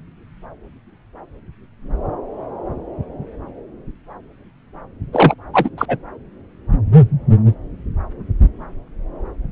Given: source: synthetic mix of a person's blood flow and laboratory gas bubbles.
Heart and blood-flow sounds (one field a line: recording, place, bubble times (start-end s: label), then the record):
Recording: Doppler ultrasound of blood flow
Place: subclavian vein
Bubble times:
5.12-5.34 s: bubbles
5.54-5.70 s: bubbles
5.78-5.86 s: bubbles
5.88-5.97 s: bubbles
From the record:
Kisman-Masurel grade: 213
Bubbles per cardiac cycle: several, 3 to 8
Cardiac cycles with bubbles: 1 to 10%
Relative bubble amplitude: loud (0.450 to 0.775)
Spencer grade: 1 (occasional bubble signal discernible with the cardiac motion signal, with majority of cardiac periods free of bubbles)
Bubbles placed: anywhere in the cardiac cycle